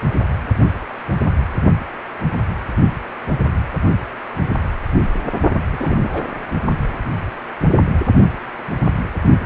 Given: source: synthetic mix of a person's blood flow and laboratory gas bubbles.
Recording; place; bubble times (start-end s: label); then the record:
Doppler ultrasound of blood flow; precordium
5.70-6.26 s: bubbles
From the record:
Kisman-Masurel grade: 211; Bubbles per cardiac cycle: several, 3 to 8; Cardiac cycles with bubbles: 1 to 10%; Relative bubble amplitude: barely perceptible (0.100 to 0.250); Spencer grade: 1 (occasional bubble signal discernible with the cardiac motion signal, with majority of cardiac periods free of bubbles); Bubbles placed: only in the low amplitude regions of the cardiac cycle